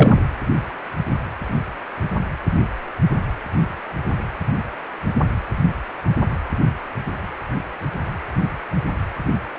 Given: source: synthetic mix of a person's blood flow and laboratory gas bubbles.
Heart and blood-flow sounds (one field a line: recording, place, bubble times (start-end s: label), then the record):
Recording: Doppler ultrasound of blood flow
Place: precordium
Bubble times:
0.00-0.19 s: bubbles
From the record:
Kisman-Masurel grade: 213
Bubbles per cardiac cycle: several, 3 to 8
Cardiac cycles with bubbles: 1 to 10%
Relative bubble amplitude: loud (0.450 to 0.775)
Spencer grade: 1 (occasional bubble signal discernible with the cardiac motion signal, with majority of cardiac periods free of bubbles)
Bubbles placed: anywhere in the cardiac cycle